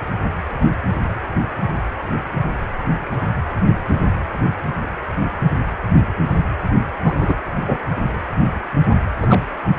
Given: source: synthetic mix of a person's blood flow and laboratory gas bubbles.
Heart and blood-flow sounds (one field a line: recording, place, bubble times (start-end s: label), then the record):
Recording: Doppler ultrasound of blood flow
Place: precordium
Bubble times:
7.04-7.34 s: bubbles
7.65-7.77 s: bubbles
9.22-9.40 s: bubbles
From the record:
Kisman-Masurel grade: 123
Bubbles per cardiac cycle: 1 to 2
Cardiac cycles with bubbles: 10 to 50%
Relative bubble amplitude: loud (0.450 to 0.775)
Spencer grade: 2 (many but less than half of the cardiac periods contain bubble signals, singularly or in groups)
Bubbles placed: anywhere in the cardiac cycle